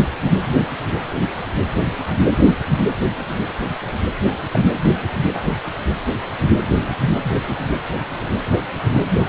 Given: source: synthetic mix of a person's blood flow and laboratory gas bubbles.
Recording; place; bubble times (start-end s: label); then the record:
Doppler ultrasound of blood flow; precordium
4.53-4.59 s: bubbles
From the record:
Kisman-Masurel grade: 112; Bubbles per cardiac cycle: 1 to 2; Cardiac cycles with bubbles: 1 to 10%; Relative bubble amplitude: moderate (0.250 to 0.450); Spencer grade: 1 (occasional bubble signal discernible with the cardiac motion signal, with majority of cardiac periods free of bubbles); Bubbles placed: anywhere in the cardiac cycle